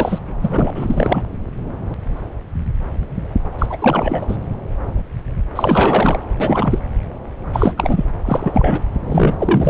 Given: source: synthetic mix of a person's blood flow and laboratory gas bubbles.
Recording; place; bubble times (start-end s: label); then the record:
Doppler ultrasound of blood flow; subclavian vein
0.00-0.18 s: bubbles
0.42-1.23 s: bubbles
3.58-3.66 s: bubbles
3.69-4.37 s: bubbles
5.55-6.20 s: bubbles
6.40-6.79 s: bubbles
7.52-7.74 s: bubbles
7.77-8.05 s: bubbles
8.25-8.81 s: bubbles
9.06-9.35 s: bubbles
9.39-9.69 s: bubbles
From the record:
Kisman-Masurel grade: 333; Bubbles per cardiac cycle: rolling drumbeat, 9 or more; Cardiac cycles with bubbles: 50 to 99%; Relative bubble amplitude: loud (0.450 to 0.775); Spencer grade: 3 (all of the cardiac periods contain showers or single bubble signals, but not dominating or overriding the cardiac motion signals); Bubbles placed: anywhere in the cardiac cycle